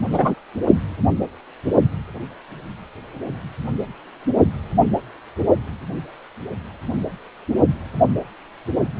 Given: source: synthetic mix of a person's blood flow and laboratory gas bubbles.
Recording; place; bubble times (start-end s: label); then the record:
Doppler ultrasound of blood flow; precordium
0.12-0.34 s: bubbles
From the record:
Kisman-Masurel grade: 113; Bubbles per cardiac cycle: 1 to 2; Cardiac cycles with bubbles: 1 to 10%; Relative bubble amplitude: loud (0.450 to 0.775); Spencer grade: 1 (occasional bubble signal discernible with the cardiac motion signal, with majority of cardiac periods free of bubbles); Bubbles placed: only in the low amplitude regions of the cardiac cycle